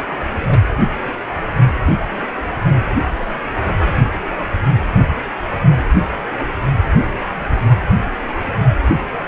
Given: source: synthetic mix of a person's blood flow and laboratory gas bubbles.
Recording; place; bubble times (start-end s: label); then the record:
Doppler ultrasound of blood flow; precordium
0.05-0.17 s: bubbles
0.20-0.26 s: bubbles
0.46-0.61 s: bubbles
0.65-0.76 s: bubbles
From the record:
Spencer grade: 1 (occasional bubble signal discernible with the cardiac motion signal, with majority of cardiac periods free of bubbles); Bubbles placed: anywhere in the cardiac cycle